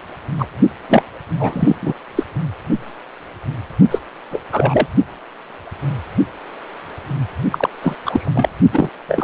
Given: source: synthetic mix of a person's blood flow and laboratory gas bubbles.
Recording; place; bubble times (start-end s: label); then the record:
Doppler ultrasound of blood flow; precordium
0.38-0.48 s: bubbles
0.89-1.03 s: bubbles
1.40-1.75 s: bubbles
1.81-1.93 s: bubbles
2.16-2.23 s: bubbles
3.91-3.99 s: bubbles
4.30-4.41 s: bubbles
4.51-4.87 s: bubbles
7.51-7.69 s: bubbles
7.83-7.95 s: bubbles
8.05-8.52 s: bubbles
8.72-8.89 s: bubbles
9.08-9.24 s: bubbles
From the record:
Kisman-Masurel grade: 233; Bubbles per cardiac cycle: several, 3 to 8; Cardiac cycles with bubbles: 50 to 99%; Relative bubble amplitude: loud (0.450 to 0.775); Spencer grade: 3 (all of the cardiac periods contain showers or single bubble signals, but not dominating or overriding the cardiac motion signals); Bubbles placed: only in the low amplitude regions of the cardiac cycle